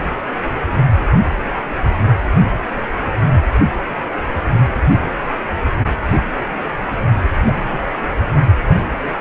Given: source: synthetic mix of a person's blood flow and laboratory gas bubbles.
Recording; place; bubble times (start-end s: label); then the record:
Doppler ultrasound of blood flow; precordium
7.46-7.80 s: bubbles
8.68-8.76 s: bubbles
From the record:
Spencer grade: 1 (occasional bubble signal discernible with the cardiac motion signal, with majority of cardiac periods free of bubbles); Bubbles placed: anywhere in the cardiac cycle